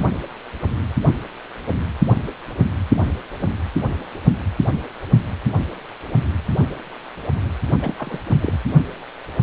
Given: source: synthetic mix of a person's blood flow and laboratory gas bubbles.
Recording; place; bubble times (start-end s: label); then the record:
Doppler ultrasound of blood flow; precordium
7.82-7.94 s: bubbles
7.98-8.20 s: bubbles
8.28-8.36 s: bubbles
8.41-8.57 s: bubbles
From the record:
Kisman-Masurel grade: 211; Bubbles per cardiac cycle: several, 3 to 8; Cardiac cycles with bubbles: 1 to 10%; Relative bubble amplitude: barely perceptible (0.100 to 0.250); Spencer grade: 1 (occasional bubble signal discernible with the cardiac motion signal, with majority of cardiac periods free of bubbles); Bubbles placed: anywhere in the cardiac cycle